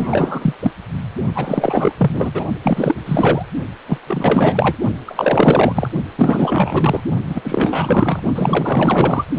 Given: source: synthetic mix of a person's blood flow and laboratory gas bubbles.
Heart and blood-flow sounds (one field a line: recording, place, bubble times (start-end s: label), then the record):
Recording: Doppler ultrasound of blood flow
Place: precordium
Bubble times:
0.00-0.53 s: bubbles
0.62-0.71 s: bubbles
1.35-1.92 s: bubbles
1.98-2.31 s: bubbles
2.33-2.45 s: bubbles
2.63-2.96 s: bubbles
3.06-3.46 s: bubbles
3.86-3.98 s: bubbles
4.06-4.78 s: bubbles
5.05-5.89 s: bubbles
6.16-7.00 s: bubbles
7.29-8.22 s: bubbles
8.35-9.24 s: bubbles
From the record:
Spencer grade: 4 (maximum detectable bubble signal sounding continuously throughout systole and diastole of every cardiac period, and overriding the amplitude of the normal cardiac signals)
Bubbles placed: only in the low amplitude regions of the cardiac cycle